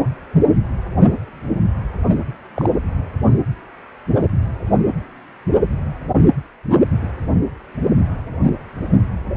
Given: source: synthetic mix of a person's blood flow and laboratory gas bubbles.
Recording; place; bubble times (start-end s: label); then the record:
Doppler ultrasound of blood flow; precordium
2.56-2.71 s: bubbles
From the record:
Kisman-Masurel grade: 112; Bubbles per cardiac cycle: 1 to 2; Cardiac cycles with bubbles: 1 to 10%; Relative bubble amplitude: moderate (0.250 to 0.450); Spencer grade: 1 (occasional bubble signal discernible with the cardiac motion signal, with majority of cardiac periods free of bubbles); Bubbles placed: only in the low amplitude regions of the cardiac cycle